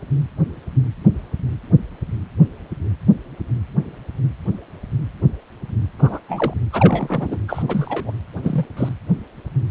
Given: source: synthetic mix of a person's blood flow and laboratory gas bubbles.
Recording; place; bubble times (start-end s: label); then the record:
Doppler ultrasound of blood flow; precordium
5.99-6.20 s: bubbles
6.28-6.54 s: bubbles
6.72-7.39 s: bubbles
7.48-7.62 s: bubbles
7.68-8.12 s: bubbles
8.43-8.66 s: bubbles
8.76-8.89 s: bubbles
From the record:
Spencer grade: 2 (many but less than half of the cardiac periods contain bubble signals, singularly or in groups); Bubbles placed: anywhere in the cardiac cycle